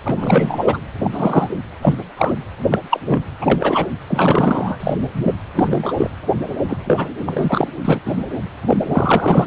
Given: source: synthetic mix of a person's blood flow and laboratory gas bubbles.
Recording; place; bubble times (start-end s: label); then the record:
Doppler ultrasound of blood flow; precordium
0.05-0.80 s: bubbles
1.03-1.49 s: bubbles
1.82-1.95 s: bubbles
2.17-2.32 s: bubbles
2.69-2.79 s: bubbles
2.90-3.00 s: bubbles
3.07-3.20 s: bubbles
3.41-3.87 s: bubbles
4.07-5.33 s: bubbles
5.55-5.93 s: bubbles
5.97-6.10 s: bubbles
6.36-7.07 s: bubbles
7.20-7.68 s: bubbles
7.84-8.00 s: bubbles
8.05-8.16 s: bubbles
8.67-9.46 s: bubbles
From the record:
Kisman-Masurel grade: 243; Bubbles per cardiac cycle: several, 3 to 8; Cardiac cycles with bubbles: 100%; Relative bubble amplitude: loud (0.450 to 0.775); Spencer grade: 3 (all of the cardiac periods contain showers or single bubble signals, but not dominating or overriding the cardiac motion signals); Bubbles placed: anywhere in the cardiac cycle